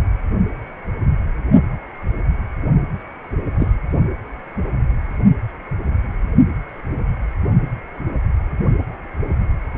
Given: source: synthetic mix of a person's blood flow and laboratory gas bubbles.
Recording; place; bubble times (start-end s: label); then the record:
Doppler ultrasound of blood flow; precordium
3.59-3.72 s: bubbles
From the record:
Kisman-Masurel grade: 112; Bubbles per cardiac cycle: 1 to 2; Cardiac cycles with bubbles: 1 to 10%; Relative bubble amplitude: moderate (0.250 to 0.450); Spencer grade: 1 (occasional bubble signal discernible with the cardiac motion signal, with majority of cardiac periods free of bubbles); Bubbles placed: only in the low amplitude regions of the cardiac cycle